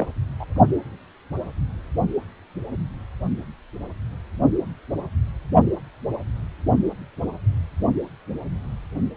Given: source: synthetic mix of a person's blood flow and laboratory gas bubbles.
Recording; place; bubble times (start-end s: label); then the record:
Doppler ultrasound of blood flow; precordium
0.00-0.07 s: bubbles
0.40-0.45 s: bubbles
From the record:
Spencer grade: 1 (occasional bubble signal discernible with the cardiac motion signal, with majority of cardiac periods free of bubbles); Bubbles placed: only in the low amplitude regions of the cardiac cycle